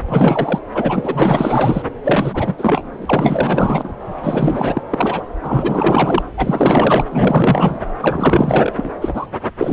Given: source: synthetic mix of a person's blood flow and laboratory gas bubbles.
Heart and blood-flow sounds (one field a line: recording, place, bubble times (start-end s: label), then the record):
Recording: Doppler ultrasound of blood flow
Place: subclavian vein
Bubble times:
0.09-0.59 s: bubbles
0.74-1.82 s: bubbles
2.03-2.55 s: bubbles
2.58-3.94 s: bubbles
4.22-4.83 s: bubbles
4.90-5.25 s: bubbles
5.43-6.22 s: bubbles
6.37-7.04 s: bubbles
7.11-7.79 s: bubbles
8.01-8.73 s: bubbles
8.76-8.92 s: bubbles
9.01-9.26 s: bubbles
9.58-9.72 s: bubbles
From the record:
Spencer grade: 4 (maximum detectable bubble signal sounding continuously throughout systole and diastole of every cardiac period, and overriding the amplitude of the normal cardiac signals)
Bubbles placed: anywhere in the cardiac cycle